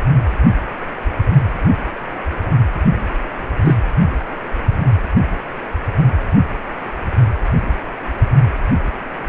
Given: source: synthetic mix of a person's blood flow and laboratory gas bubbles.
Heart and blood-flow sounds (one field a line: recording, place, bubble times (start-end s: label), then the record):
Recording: Doppler ultrasound of blood flow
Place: precordium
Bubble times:
3.65-3.75 s: bubbles
From the record:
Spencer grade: 1 (occasional bubble signal discernible with the cardiac motion signal, with majority of cardiac periods free of bubbles)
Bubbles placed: anywhere in the cardiac cycle